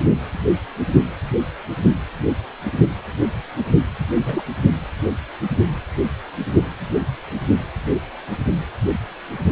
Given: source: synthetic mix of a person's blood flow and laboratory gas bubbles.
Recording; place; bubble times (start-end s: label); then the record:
Doppler ultrasound of blood flow; precordium
4.16-4.42 s: bubbles
From the record:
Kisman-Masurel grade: 212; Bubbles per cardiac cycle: several, 3 to 8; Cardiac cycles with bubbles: 1 to 10%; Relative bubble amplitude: moderate (0.250 to 0.450); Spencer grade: 1 (occasional bubble signal discernible with the cardiac motion signal, with majority of cardiac periods free of bubbles); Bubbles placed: anywhere in the cardiac cycle